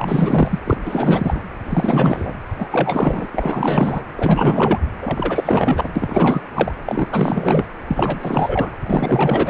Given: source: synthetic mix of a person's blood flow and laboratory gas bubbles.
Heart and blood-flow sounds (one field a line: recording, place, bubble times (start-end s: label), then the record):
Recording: Doppler ultrasound of blood flow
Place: precordium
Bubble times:
0.00-0.59 s: bubbles
0.65-0.77 s: bubbles
0.83-1.41 s: bubbles
1.65-2.33 s: bubbles
2.58-2.69 s: bubbles
2.71-3.26 s: bubbles
3.32-4.04 s: bubbles
4.17-4.81 s: bubbles
5.01-5.89 s: bubbles
5.96-6.42 s: bubbles
6.54-6.72 s: bubbles
6.85-7.08 s: bubbles
7.12-7.66 s: bubbles
7.87-8.71 s: bubbles
8.86-9.50 s: bubbles
From the record:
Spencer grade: 4 (maximum detectable bubble signal sounding continuously throughout systole and diastole of every cardiac period, and overriding the amplitude of the normal cardiac signals)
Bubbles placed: anywhere in the cardiac cycle